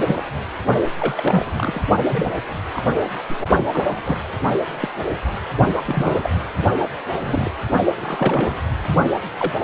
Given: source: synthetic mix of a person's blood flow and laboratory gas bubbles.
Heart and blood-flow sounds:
Doppler ultrasound of blood flow; precordium
0.00-0.23 s: bubbles
0.98-1.52 s: bubbles
1.56-1.82 s: bubbles
2.02-2.38 s: bubbles
2.73-2.83 s: bubbles
3.29-3.36 s: bubbles
3.73-4.23 s: bubbles
4.80-4.88 s: bubbles
5.73-5.78 s: bubbles
5.86-6.30 s: bubbles
7.24-7.51 s: bubbles
7.96-8.62 s: bubbles
9.38-9.52 s: bubbles
9.60-9.64 s: bubbles
From the record:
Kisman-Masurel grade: 242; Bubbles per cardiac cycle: several, 3 to 8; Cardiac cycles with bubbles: 100%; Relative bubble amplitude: moderate (0.250 to 0.450); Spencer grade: 3 (all of the cardiac periods contain showers or single bubble signals, but not dominating or overriding the cardiac motion signals); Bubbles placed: only in the low amplitude regions of the cardiac cycle

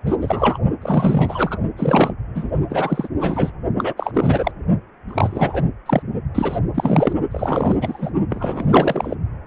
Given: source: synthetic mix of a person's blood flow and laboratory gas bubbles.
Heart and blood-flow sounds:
Doppler ultrasound of blood flow; precordium
0.06-0.17 s: bubbles
0.21-0.58 s: bubbles
0.82-1.58 s: bubbles
1.77-2.14 s: bubbles
2.35-2.50 s: bubbles
2.69-3.08 s: bubbles
3.19-3.52 s: bubbles
3.77-3.94 s: bubbles
3.97-4.52 s: bubbles
5.07-5.69 s: bubbles
5.86-6.03 s: bubbles
6.35-6.59 s: bubbles
6.74-7.13 s: bubbles
7.31-7.76 s: bubbles
7.81-8.09 s: bubbles
8.29-9.15 s: bubbles
From the record:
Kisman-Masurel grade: 343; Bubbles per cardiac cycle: rolling drumbeat, 9 or more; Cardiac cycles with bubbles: 100%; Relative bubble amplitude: loud (0.450 to 0.775); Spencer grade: 3 (all of the cardiac periods contain showers or single bubble signals, but not dominating or overriding the cardiac motion signals); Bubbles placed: only in the low amplitude regions of the cardiac cycle

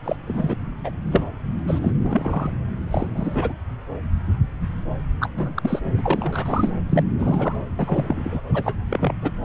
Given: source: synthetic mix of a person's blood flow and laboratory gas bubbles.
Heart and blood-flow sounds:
Doppler ultrasound of blood flow; subclavian vein
0.04-0.16 s: bubbles
0.25-0.56 s: bubbles
0.83-0.90 s: bubbles
1.06-1.25 s: bubbles
1.67-1.93 s: bubbles
2.00-2.50 s: bubbles
2.91-3.53 s: bubbles
5.20-5.29 s: bubbles
5.37-5.51 s: bubbles
5.55-5.79 s: bubbles
5.97-6.73 s: bubbles
6.89-7.03 s: bubbles
7.19-7.58 s: bubbles
7.79-8.42 s: bubbles
8.54-8.74 s: bubbles
8.89-9.13 s: bubbles
9.21-9.31 s: bubbles
From the record:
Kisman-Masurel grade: 233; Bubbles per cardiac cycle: several, 3 to 8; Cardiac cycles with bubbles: 50 to 99%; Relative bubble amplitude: loud (0.450 to 0.775); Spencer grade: 3 (all of the cardiac periods contain showers or single bubble signals, but not dominating or overriding the cardiac motion signals); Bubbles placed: anywhere in the cardiac cycle

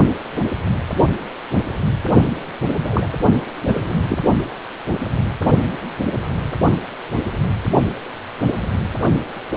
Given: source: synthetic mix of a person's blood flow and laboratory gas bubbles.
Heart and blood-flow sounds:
Doppler ultrasound of blood flow; precordium
2.82-3.09 s: bubbles
3.67-4.01 s: bubbles
4.08-4.18 s: bubbles
From the record:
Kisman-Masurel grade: 213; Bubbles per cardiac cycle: several, 3 to 8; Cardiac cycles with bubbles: 1 to 10%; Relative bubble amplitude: loud (0.450 to 0.775); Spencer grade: 1 (occasional bubble signal discernible with the cardiac motion signal, with majority of cardiac periods free of bubbles); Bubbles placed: only in the low amplitude regions of the cardiac cycle

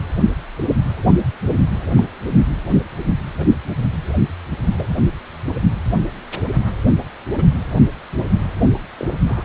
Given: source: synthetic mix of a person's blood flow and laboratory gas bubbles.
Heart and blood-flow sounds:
Doppler ultrasound of blood flow; precordium
1.97-2.06 s: bubbles
3.37-3.45 s: bubbles
4.78-4.87 s: bubbles
7.34-7.44 s: bubbles
8.98-9.08 s: bubbles
9.27-9.44 s: bubbles
From the record:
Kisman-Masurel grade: 121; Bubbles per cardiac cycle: 1 to 2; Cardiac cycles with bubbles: 10 to 50%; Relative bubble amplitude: barely perceptible (0.100 to 0.250); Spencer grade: 2 (many but less than half of the cardiac periods contain bubble signals, singularly or in groups); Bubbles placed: only in the low amplitude regions of the cardiac cycle

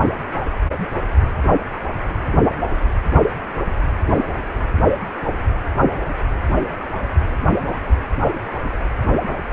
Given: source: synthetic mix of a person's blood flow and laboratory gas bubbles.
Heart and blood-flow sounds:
Doppler ultrasound of blood flow; precordium
no bubbles
From the record:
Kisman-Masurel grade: 000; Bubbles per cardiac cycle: 0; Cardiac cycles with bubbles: 0%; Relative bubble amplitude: no bubbles discernible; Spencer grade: 0 (complete lack of bubble signals)

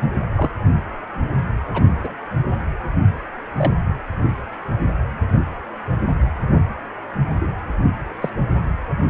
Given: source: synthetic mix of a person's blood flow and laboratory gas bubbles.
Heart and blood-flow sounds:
Doppler ultrasound of blood flow; precordium
0.35-0.50 s: bubbles
1.73-1.85 s: bubbles
2.03-2.14 s: bubbles
3.57-3.74 s: bubbles
7.41-7.53 s: bubbles
8.21-8.29 s: bubbles
From the record:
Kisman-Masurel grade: 122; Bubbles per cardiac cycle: 1 to 2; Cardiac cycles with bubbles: 10 to 50%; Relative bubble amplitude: moderate (0.250 to 0.450); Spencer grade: 2 (many but less than half of the cardiac periods contain bubble signals, singularly or in groups); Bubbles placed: anywhere in the cardiac cycle

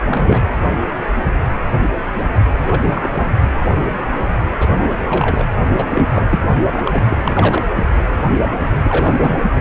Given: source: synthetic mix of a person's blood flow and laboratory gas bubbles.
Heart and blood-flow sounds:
Doppler ultrasound of blood flow; precordium
0.05-0.46 s: bubbles
2.59-2.82 s: bubbles
2.94-3.35 s: bubbles
4.60-4.67 s: bubbles
4.88-4.98 s: bubbles
5.06-5.48 s: bubbles
5.77-5.85 s: bubbles
5.95-6.05 s: bubbles
6.11-6.27 s: bubbles
6.30-6.42 s: bubbles
6.74-7.04 s: bubbles
7.10-7.19 s: bubbles
7.24-7.66 s: bubbles
8.84-9.38 s: bubbles
9.54-9.61 s: bubbles
From the record:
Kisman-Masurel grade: 232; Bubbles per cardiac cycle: several, 3 to 8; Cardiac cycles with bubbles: 50 to 99%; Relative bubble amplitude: moderate (0.250 to 0.450); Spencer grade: 3 (all of the cardiac periods contain showers or single bubble signals, but not dominating or overriding the cardiac motion signals); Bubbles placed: anywhere in the cardiac cycle

